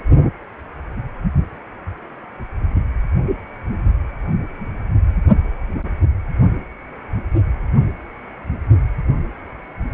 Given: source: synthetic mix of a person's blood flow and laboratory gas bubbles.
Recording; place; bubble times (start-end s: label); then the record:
Doppler ultrasound of blood flow; precordium
no bubbles
From the record:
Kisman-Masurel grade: 000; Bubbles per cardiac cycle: 0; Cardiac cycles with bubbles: 0%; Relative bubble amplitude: no bubbles discernible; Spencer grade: 0 (complete lack of bubble signals)